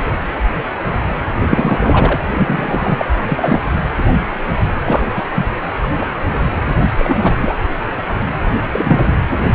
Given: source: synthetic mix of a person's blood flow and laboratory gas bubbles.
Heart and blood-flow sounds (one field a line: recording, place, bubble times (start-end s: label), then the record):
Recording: Doppler ultrasound of blood flow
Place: precordium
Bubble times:
1.50-2.19 s: bubbles
2.36-3.05 s: bubbles
3.25-3.82 s: bubbles
4.85-5.03 s: bubbles
5.13-5.24 s: bubbles
5.34-5.46 s: bubbles
5.83-5.88 s: bubbles
5.98-6.06 s: bubbles
6.68-6.75 s: bubbles
6.98-7.54 s: bubbles
8.72-9.04 s: bubbles
9.53-9.55 s: bubbles
From the record:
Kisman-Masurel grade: 233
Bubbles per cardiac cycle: several, 3 to 8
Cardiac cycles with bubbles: 50 to 99%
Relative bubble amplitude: loud (0.450 to 0.775)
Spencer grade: 3 (all of the cardiac periods contain showers or single bubble signals, but not dominating or overriding the cardiac motion signals)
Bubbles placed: anywhere in the cardiac cycle